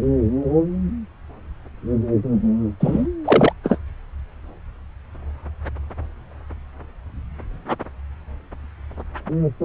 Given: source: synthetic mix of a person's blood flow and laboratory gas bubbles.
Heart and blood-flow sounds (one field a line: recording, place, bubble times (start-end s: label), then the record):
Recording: Doppler ultrasound of blood flow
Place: subclavian vein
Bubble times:
2.80-3.07 s: bubbles
3.24-3.52 s: bubbles
3.64-3.78 s: bubbles
From the record:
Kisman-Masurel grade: 223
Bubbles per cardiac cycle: several, 3 to 8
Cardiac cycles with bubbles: 10 to 50%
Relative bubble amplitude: loud (0.450 to 0.775)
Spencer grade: 2 (many but less than half of the cardiac periods contain bubble signals, singularly or in groups)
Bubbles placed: anywhere in the cardiac cycle